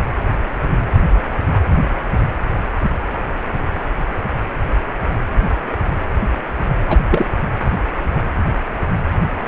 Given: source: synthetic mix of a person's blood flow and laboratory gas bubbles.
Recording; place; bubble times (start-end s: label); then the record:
Doppler ultrasound of blood flow; precordium
6.88-6.99 s: bubbles
7.11-7.26 s: bubbles
From the record:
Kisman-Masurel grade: 213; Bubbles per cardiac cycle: several, 3 to 8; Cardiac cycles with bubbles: 1 to 10%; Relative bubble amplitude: loud (0.450 to 0.775); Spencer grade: 1 (occasional bubble signal discernible with the cardiac motion signal, with majority of cardiac periods free of bubbles); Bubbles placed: anywhere in the cardiac cycle